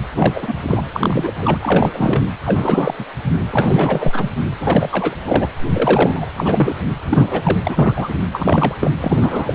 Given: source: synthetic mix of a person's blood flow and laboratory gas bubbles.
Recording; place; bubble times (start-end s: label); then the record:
Doppler ultrasound of blood flow; precordium
0.14-0.53 s: bubbles
0.67-0.82 s: bubbles
0.94-1.33 s: bubbles
1.39-1.58 s: bubbles
1.62-1.91 s: bubbles
1.93-2.23 s: bubbles
2.45-2.94 s: bubbles
2.98-3.04 s: bubbles
3.51-4.30 s: bubbles
4.60-5.16 s: bubbles
5.25-5.46 s: bubbles
5.72-6.25 s: bubbles
6.38-6.75 s: bubbles
7.10-7.58 s: bubbles
7.64-7.94 s: bubbles
7.96-8.08 s: bubbles
8.32-8.75 s: bubbles
8.80-8.91 s: bubbles
9.01-9.55 s: bubbles
From the record:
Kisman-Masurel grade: 342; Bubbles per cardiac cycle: rolling drumbeat, 9 or more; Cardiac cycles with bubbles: 100%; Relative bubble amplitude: moderate (0.250 to 0.450); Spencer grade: 3 (all of the cardiac periods contain showers or single bubble signals, but not dominating or overriding the cardiac motion signals); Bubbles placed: anywhere in the cardiac cycle